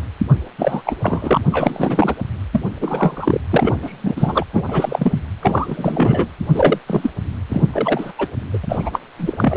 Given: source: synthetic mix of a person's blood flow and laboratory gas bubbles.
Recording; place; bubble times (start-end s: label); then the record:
Doppler ultrasound of blood flow; precordium
0.58-0.82 s: bubbles
0.84-0.95 s: bubbles
1.01-1.41 s: bubbles
1.52-2.15 s: bubbles
2.52-2.62 s: bubbles
2.81-3.41 s: bubbles
3.50-3.78 s: bubbles
3.82-4.46 s: bubbles
4.53-4.63 s: bubbles
4.68-5.19 s: bubbles
5.42-6.28 s: bubbles
6.53-6.79 s: bubbles
6.87-7.10 s: bubbles
7.49-7.67 s: bubbles
7.72-8.12 s: bubbles
8.18-8.28 s: bubbles
8.53-8.58 s: bubbles
8.63-8.90 s: bubbles
8.93-8.99 s: bubbles
9.18-9.57 s: bubbles
From the record:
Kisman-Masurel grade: 343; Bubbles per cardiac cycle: rolling drumbeat, 9 or more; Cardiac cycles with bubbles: 100%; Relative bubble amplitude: loud (0.450 to 0.775); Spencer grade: 3 (all of the cardiac periods contain showers or single bubble signals, but not dominating or overriding the cardiac motion signals); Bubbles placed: anywhere in the cardiac cycle